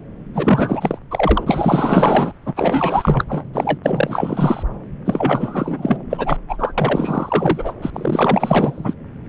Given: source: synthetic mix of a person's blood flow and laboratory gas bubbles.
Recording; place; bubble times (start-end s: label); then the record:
Doppler ultrasound of blood flow; subclavian vein
0.34-0.98 s: bubbles
1.10-2.33 s: bubbles
2.46-2.53 s: bubbles
2.56-3.25 s: bubbles
3.29-3.44 s: bubbles
3.54-4.63 s: bubbles
5.05-5.98 s: bubbles
6.09-6.37 s: bubbles
6.48-6.74 s: bubbles
6.78-7.75 s: bubbles
7.82-7.91 s: bubbles
7.93-8.94 s: bubbles
From the record:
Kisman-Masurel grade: 444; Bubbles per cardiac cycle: continuous sound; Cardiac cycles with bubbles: 100%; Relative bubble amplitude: maximal (0.775 to 0.999); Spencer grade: 4 (maximum detectable bubble signal sounding continuously throughout systole and diastole of every cardiac period, and overriding the amplitude of the normal cardiac signals); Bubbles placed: anywhere in the cardiac cycle